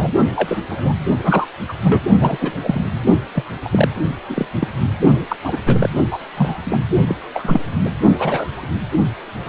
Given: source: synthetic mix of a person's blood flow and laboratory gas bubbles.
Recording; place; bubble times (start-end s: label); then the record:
Doppler ultrasound of blood flow; precordium
0.00-0.12 s: bubbles
0.35-0.61 s: bubbles
0.69-0.93 s: bubbles
1.23-1.47 s: bubbles
1.68-1.73 s: bubbles
1.84-2.03 s: bubbles
2.19-2.60 s: bubbles
2.63-2.82 s: bubbles
3.34-3.44 s: bubbles
3.64-3.69 s: bubbles
3.72-3.88 s: bubbles
4.28-4.47 s: bubbles
4.59-4.68 s: bubbles
5.28-5.37 s: bubbles
5.43-5.57 s: bubbles
5.66-5.89 s: bubbles
6.12-6.19 s: bubbles
6.36-6.58 s: bubbles
6.64-6.79 s: bubbles
7.07-7.16 s: bubbles
7.34-7.60 s: bubbles
7.80-7.89 s: bubbles
8.19-8.67 s: bubbles
9.46-9.49 s: bubbles
From the record:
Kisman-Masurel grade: 242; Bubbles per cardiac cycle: several, 3 to 8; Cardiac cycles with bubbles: 100%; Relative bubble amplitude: moderate (0.250 to 0.450); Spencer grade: 3 (all of the cardiac periods contain showers or single bubble signals, but not dominating or overriding the cardiac motion signals); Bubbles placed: only in the low amplitude regions of the cardiac cycle